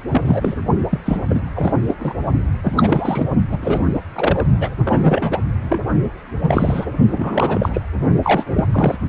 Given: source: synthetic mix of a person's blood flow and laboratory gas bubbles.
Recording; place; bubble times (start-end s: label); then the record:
Doppler ultrasound of blood flow; precordium
0.08-0.55 s: bubbles
0.90-1.00 s: bubbles
1.05-1.17 s: bubbles
1.29-1.41 s: bubbles
1.53-1.95 s: bubbles
1.99-2.13 s: bubbles
2.63-3.24 s: bubbles
3.51-3.57 s: bubbles
3.62-3.79 s: bubbles
3.93-4.00 s: bubbles
4.16-4.46 s: bubbles
4.58-4.74 s: bubbles
4.84-5.38 s: bubbles
5.63-5.79 s: bubbles
6.42-6.85 s: bubbles
7.10-7.81 s: bubbles
8.22-8.64 s: bubbles
8.72-8.97 s: bubbles
From the record:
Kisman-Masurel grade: 332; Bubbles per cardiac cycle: rolling drumbeat, 9 or more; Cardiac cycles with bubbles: 50 to 99%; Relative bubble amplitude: moderate (0.250 to 0.450); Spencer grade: 3 (all of the cardiac periods contain showers or single bubble signals, but not dominating or overriding the cardiac motion signals); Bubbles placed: only in the low amplitude regions of the cardiac cycle